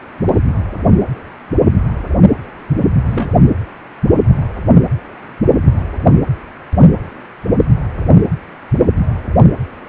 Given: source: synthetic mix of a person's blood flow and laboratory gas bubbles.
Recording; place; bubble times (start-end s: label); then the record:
Doppler ultrasound of blood flow; precordium
0.27-0.38 s: bubbles
3.10-3.29 s: bubbles
From the record:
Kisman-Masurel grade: 112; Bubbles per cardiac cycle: 1 to 2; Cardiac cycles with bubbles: 1 to 10%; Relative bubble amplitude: moderate (0.250 to 0.450); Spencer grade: 1 (occasional bubble signal discernible with the cardiac motion signal, with majority of cardiac periods free of bubbles); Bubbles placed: anywhere in the cardiac cycle